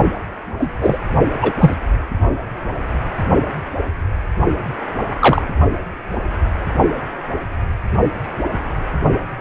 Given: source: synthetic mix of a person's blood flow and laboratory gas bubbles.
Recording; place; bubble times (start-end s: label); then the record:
Doppler ultrasound of blood flow; precordium
0.58-0.69 s: bubbles
0.80-0.98 s: bubbles
1.42-1.52 s: bubbles
1.60-1.74 s: bubbles
5.20-5.42 s: bubbles
From the record:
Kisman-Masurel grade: 123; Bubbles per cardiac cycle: 1 to 2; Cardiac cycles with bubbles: 10 to 50%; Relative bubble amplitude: loud (0.450 to 0.775); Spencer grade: 2 (many but less than half of the cardiac periods contain bubble signals, singularly or in groups); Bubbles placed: only in the low amplitude regions of the cardiac cycle